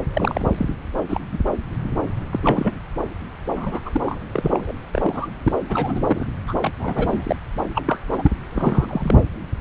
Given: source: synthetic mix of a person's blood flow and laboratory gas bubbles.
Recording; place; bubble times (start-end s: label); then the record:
Doppler ultrasound of blood flow; subclavian vein
0.13-0.48 s: bubbles
0.57-0.66 s: bubbles
1.08-1.21 s: bubbles
1.31-1.38 s: bubbles
2.33-2.40 s: bubbles
2.42-2.73 s: bubbles
3.56-3.80 s: bubbles
3.85-4.19 s: bubbles
4.33-4.73 s: bubbles
4.92-5.27 s: bubbles
5.45-5.52 s: bubbles
5.69-6.27 s: bubbles
6.48-6.54 s: bubbles
6.61-6.72 s: bubbles
6.80-7.36 s: bubbles
7.75-8.00 s: bubbles
8.09-8.30 s: bubbles
8.53-9.22 s: bubbles
From the record:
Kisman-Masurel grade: 242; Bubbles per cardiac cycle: several, 3 to 8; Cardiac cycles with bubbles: 100%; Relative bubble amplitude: moderate (0.250 to 0.450); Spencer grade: 3 (all of the cardiac periods contain showers or single bubble signals, but not dominating or overriding the cardiac motion signals); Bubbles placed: anywhere in the cardiac cycle